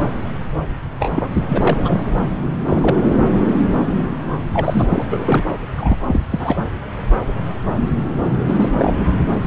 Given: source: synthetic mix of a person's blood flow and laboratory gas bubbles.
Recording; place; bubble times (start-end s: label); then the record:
Doppler ultrasound of blood flow; subclavian vein
0.99-1.12 s: bubbles
1.16-1.28 s: bubbles
1.48-1.78 s: bubbles
1.83-1.99 s: bubbles
2.67-3.05 s: bubbles
4.52-5.04 s: bubbles
5.11-5.46 s: bubbles
5.76-5.96 s: bubbles
6.08-6.20 s: bubbles
6.32-6.62 s: bubbles
8.46-8.72 s: bubbles
8.77-8.93 s: bubbles
From the record:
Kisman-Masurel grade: 222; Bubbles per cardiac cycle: several, 3 to 8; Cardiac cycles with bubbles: 10 to 50%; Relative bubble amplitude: moderate (0.250 to 0.450); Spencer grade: 2 (many but less than half of the cardiac periods contain bubble signals, singularly or in groups); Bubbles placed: anywhere in the cardiac cycle